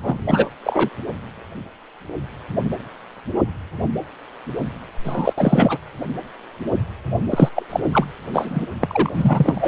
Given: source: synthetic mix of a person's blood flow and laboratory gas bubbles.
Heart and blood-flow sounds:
Doppler ultrasound of blood flow; precordium
0.00-0.49 s: bubbles
0.64-0.89 s: bubbles
5.04-5.33 s: bubbles
5.37-5.78 s: bubbles
7.31-7.49 s: bubbles
7.55-7.63 s: bubbles
7.70-7.80 s: bubbles
7.93-8.04 s: bubbles
8.33-8.65 s: bubbles
8.80-9.68 s: bubbles
From the record:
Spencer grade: 3 (all of the cardiac periods contain showers or single bubble signals, but not dominating or overriding the cardiac motion signals); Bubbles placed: only in the low amplitude regions of the cardiac cycle

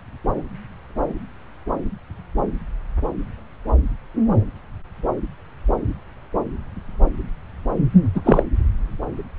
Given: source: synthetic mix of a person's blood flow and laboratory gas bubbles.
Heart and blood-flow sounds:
Doppler ultrasound of blood flow; subclavian vein
8.14-8.21 s: bubbles
8.24-8.43 s: bubbles
From the record:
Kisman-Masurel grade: 213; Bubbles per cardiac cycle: several, 3 to 8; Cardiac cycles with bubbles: 1 to 10%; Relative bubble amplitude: loud (0.450 to 0.775); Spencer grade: 1 (occasional bubble signal discernible with the cardiac motion signal, with majority of cardiac periods free of bubbles); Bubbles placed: anywhere in the cardiac cycle

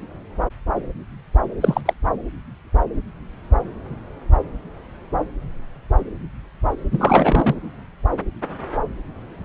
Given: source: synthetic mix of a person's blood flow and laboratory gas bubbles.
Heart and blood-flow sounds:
Doppler ultrasound of blood flow; subclavian vein
1.60-1.81 s: bubbles
1.85-1.94 s: bubbles
6.92-7.55 s: bubbles
From the record:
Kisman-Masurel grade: 223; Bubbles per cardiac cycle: several, 3 to 8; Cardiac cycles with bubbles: 10 to 50%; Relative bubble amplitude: loud (0.450 to 0.775); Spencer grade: 2 (many but less than half of the cardiac periods contain bubble signals, singularly or in groups); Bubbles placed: anywhere in the cardiac cycle

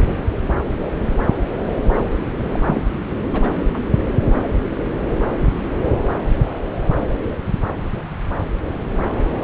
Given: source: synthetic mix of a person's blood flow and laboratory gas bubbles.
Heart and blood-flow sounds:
Doppler ultrasound of blood flow; subclavian vein
2.45-2.82 s: bubbles
3.33-3.79 s: bubbles
From the record:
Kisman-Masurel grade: 212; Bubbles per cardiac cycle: several, 3 to 8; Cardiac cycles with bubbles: 1 to 10%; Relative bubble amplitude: moderate (0.250 to 0.450); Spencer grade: 1 (occasional bubble signal discernible with the cardiac motion signal, with majority of cardiac periods free of bubbles); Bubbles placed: anywhere in the cardiac cycle

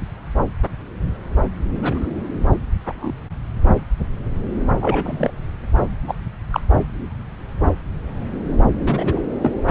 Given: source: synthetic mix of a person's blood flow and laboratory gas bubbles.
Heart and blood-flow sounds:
Doppler ultrasound of blood flow; subclavian vein
1.82-2.06 s: bubbles
2.82-3.18 s: bubbles
4.80-5.30 s: bubbles
6.08-6.14 s: bubbles
6.50-6.60 s: bubbles
8.81-9.20 s: bubbles
9.42-9.52 s: bubbles
From the record:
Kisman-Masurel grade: 123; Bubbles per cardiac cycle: 1 to 2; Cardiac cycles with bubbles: 10 to 50%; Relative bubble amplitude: loud (0.450 to 0.775); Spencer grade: 2 (many but less than half of the cardiac periods contain bubble signals, singularly or in groups); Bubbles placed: anywhere in the cardiac cycle

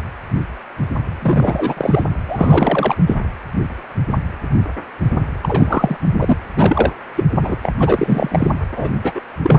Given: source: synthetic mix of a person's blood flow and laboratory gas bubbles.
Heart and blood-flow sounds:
Doppler ultrasound of blood flow; precordium
1.22-2.04 s: bubbles
2.28-2.96 s: bubbles
2.98-3.04 s: bubbles
3.06-3.15 s: bubbles
5.42-5.96 s: bubbles
6.09-6.37 s: bubbles
6.57-6.92 s: bubbles
7.16-7.24 s: bubbles
7.42-7.57 s: bubbles
7.62-7.72 s: bubbles
7.79-8.51 s: bubbles
8.76-8.93 s: bubbles
9.04-9.21 s: bubbles
9.43-9.59 s: bubbles
From the record:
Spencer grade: 3 (all of the cardiac periods contain showers or single bubble signals, but not dominating or overriding the cardiac motion signals); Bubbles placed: anywhere in the cardiac cycle

